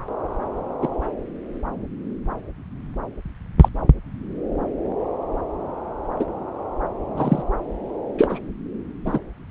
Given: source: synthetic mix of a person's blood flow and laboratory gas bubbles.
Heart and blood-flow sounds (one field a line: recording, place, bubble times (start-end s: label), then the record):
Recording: Doppler ultrasound of blood flow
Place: subclavian vein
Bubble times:
0.82-0.88 s: bubbles
3.61-3.69 s: bubbles
6.19-6.25 s: bubbles
7.16-7.42 s: bubbles
8.18-8.39 s: bubbles
9.05-9.20 s: bubbles
From the record:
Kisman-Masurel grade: 123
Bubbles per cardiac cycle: 1 to 2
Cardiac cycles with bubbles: 10 to 50%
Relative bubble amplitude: loud (0.450 to 0.775)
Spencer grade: 2 (many but less than half of the cardiac periods contain bubble signals, singularly or in groups)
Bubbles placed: anywhere in the cardiac cycle